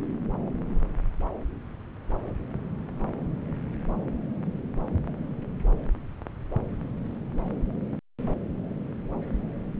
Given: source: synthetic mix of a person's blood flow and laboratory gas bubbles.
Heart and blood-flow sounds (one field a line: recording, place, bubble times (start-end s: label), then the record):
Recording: Doppler ultrasound of blood flow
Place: subclavian vein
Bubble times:
no bubbles
From the record:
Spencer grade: 0 (complete lack of bubble signals)